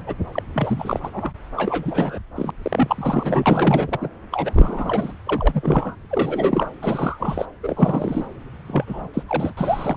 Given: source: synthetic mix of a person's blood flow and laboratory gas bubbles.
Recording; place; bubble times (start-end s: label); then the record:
Doppler ultrasound of blood flow; subclavian vein
0.06-0.15 s: bubbles
0.32-0.42 s: bubbles
0.54-1.32 s: bubbles
1.56-2.19 s: bubbles
2.35-2.50 s: bubbles
2.62-4.09 s: bubbles
4.30-5.13 s: bubbles
5.26-5.96 s: bubbles
6.10-6.70 s: bubbles
6.82-7.46 s: bubbles
7.63-8.27 s: bubbles
8.68-9.08 s: bubbles
9.13-9.22 s: bubbles
9.27-9.53 s: bubbles
9.57-9.96 s: bubbles
From the record:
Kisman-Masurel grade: 343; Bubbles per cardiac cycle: rolling drumbeat, 9 or more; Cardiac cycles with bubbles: 100%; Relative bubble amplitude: loud (0.450 to 0.775); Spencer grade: 3 (all of the cardiac periods contain showers or single bubble signals, but not dominating or overriding the cardiac motion signals); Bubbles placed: anywhere in the cardiac cycle